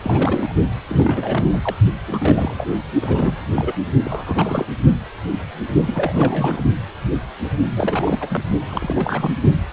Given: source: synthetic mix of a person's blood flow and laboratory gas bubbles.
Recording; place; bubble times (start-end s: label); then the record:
Doppler ultrasound of blood flow; precordium
0.00-0.52 s: bubbles
0.89-1.75 s: bubbles
2.07-2.65 s: bubbles
3.02-3.45 s: bubbles
3.56-3.75 s: bubbles
4.04-4.66 s: bubbles
5.87-6.62 s: bubbles
7.75-8.44 s: bubbles
8.69-9.42 s: bubbles
From the record:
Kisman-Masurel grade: 332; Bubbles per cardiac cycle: rolling drumbeat, 9 or more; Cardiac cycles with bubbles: 50 to 99%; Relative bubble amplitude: moderate (0.250 to 0.450); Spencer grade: 3 (all of the cardiac periods contain showers or single bubble signals, but not dominating or overriding the cardiac motion signals); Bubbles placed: only in the low amplitude regions of the cardiac cycle